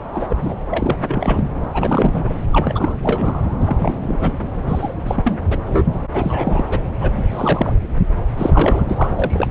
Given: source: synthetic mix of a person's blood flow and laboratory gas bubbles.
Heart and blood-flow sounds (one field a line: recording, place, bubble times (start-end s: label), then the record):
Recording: Doppler ultrasound of blood flow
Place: subclavian vein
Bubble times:
0.15-0.27 s: bubbles
0.30-0.54 s: bubbles
0.70-0.97 s: bubbles
1.02-1.51 s: bubbles
1.74-2.33 s: bubbles
2.53-2.97 s: bubbles
3.03-3.42 s: bubbles
3.60-4.42 s: bubbles
4.67-4.89 s: bubbles
5.06-5.39 s: bubbles
5.50-5.58 s: bubbles
5.65-5.88 s: bubbles
6.12-6.65 s: bubbles
6.71-6.79 s: bubbles
7.01-7.72 s: bubbles
8.38-8.83 s: bubbles
8.88-9.51 s: bubbles
From the record:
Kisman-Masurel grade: 342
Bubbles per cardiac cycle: rolling drumbeat, 9 or more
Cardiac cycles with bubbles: 100%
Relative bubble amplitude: moderate (0.250 to 0.450)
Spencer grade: 3 (all of the cardiac periods contain showers or single bubble signals, but not dominating or overriding the cardiac motion signals)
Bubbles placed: anywhere in the cardiac cycle